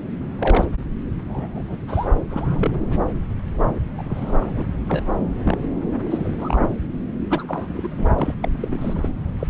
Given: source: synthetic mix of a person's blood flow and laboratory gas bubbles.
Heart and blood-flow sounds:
Doppler ultrasound of blood flow; subclavian vein
0.39-0.66 s: bubbles
1.28-1.77 s: bubbles
1.88-2.08 s: bubbles
2.27-2.79 s: bubbles
2.90-2.98 s: bubbles
3.97-4.51 s: bubbles
4.54-4.65 s: bubbles
4.88-5.00 s: bubbles
5.45-5.58 s: bubbles
6.07-6.61 s: bubbles
7.29-8.08 s: bubbles
8.14-8.35 s: bubbles
8.42-8.49 s: bubbles
8.60-9.10 s: bubbles
9.40-9.47 s: bubbles
From the record:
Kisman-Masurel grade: 242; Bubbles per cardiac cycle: several, 3 to 8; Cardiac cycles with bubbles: 100%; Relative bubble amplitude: moderate (0.250 to 0.450); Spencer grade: 3 (all of the cardiac periods contain showers or single bubble signals, but not dominating or overriding the cardiac motion signals); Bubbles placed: anywhere in the cardiac cycle

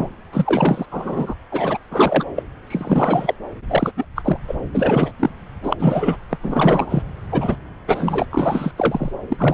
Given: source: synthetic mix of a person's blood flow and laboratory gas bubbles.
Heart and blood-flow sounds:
Doppler ultrasound of blood flow; subclavian vein
0.00-0.09 s: bubbles
0.32-0.86 s: bubbles
0.91-1.34 s: bubbles
1.52-1.78 s: bubbles
1.91-2.24 s: bubbles
2.35-2.43 s: bubbles
2.67-3.34 s: bubbles
3.69-3.91 s: bubbles
3.97-4.05 s: bubbles
4.16-4.38 s: bubbles
4.48-4.55 s: bubbles
4.74-5.12 s: bubbles
5.20-5.30 s: bubbles
5.63-6.17 s: bubbles
6.29-6.37 s: bubbles
6.42-7.03 s: bubbles
7.32-7.56 s: bubbles
7.88-8.25 s: bubbles
8.31-8.71 s: bubbles
8.77-9.12 s: bubbles
9.29-9.54 s: bubbles
From the record:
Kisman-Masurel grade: 342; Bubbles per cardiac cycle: rolling drumbeat, 9 or more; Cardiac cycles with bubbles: 100%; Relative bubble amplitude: moderate (0.250 to 0.450); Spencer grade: 3 (all of the cardiac periods contain showers or single bubble signals, but not dominating or overriding the cardiac motion signals); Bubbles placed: anywhere in the cardiac cycle

